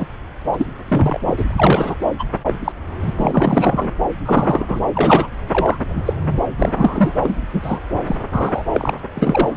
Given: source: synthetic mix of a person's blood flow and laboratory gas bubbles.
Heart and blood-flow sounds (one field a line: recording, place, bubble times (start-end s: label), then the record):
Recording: Doppler ultrasound of blood flow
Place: subclavian vein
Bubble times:
0.00-0.06 s: bubbles
0.53-0.67 s: bubbles
0.90-1.18 s: bubbles
1.27-1.95 s: bubbles
2.18-2.25 s: bubbles
2.46-2.54 s: bubbles
2.64-2.72 s: bubbles
3.03-3.12 s: bubbles
3.16-3.91 s: bubbles
4.25-4.79 s: bubbles
4.94-5.29 s: bubbles
5.51-5.78 s: bubbles
5.88-6.02 s: bubbles
6.05-6.13 s: bubbles
6.57-7.13 s: bubbles
7.22-7.37 s: bubbles
7.53-7.79 s: bubbles
8.06-8.15 s: bubbles
8.31-8.62 s: bubbles
8.72-8.94 s: bubbles
9.15-9.48 s: bubbles
From the record:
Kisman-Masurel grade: 243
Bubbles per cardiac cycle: several, 3 to 8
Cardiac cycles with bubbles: 100%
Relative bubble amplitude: loud (0.450 to 0.775)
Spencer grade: 3 (all of the cardiac periods contain showers or single bubble signals, but not dominating or overriding the cardiac motion signals)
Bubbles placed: anywhere in the cardiac cycle